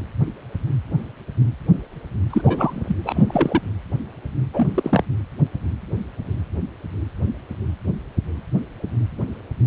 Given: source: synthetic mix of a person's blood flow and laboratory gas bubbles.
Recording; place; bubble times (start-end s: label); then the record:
Doppler ultrasound of blood flow; precordium
2.30-2.98 s: bubbles
3.04-3.25 s: bubbles
3.28-3.61 s: bubbles
4.53-4.70 s: bubbles
4.75-5.04 s: bubbles
From the record:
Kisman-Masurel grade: 222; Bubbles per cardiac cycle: several, 3 to 8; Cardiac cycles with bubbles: 10 to 50%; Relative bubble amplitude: moderate (0.250 to 0.450); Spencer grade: 2 (many but less than half of the cardiac periods contain bubble signals, singularly or in groups); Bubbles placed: anywhere in the cardiac cycle